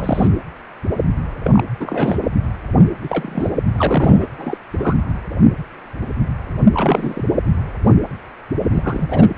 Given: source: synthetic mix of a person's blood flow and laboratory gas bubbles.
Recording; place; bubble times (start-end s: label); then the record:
Doppler ultrasound of blood flow; precordium
0.00-0.28 s: bubbles
1.43-1.64 s: bubbles
1.80-2.28 s: bubbles
3.01-3.51 s: bubbles
3.72-4.25 s: bubbles
4.38-4.58 s: bubbles
4.78-4.94 s: bubbles
6.74-7.24 s: bubbles
8.71-9.29 s: bubbles
From the record:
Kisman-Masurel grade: 232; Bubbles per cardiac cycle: several, 3 to 8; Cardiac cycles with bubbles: 50 to 99%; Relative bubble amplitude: moderate (0.250 to 0.450); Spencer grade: 3 (all of the cardiac periods contain showers or single bubble signals, but not dominating or overriding the cardiac motion signals); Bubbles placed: anywhere in the cardiac cycle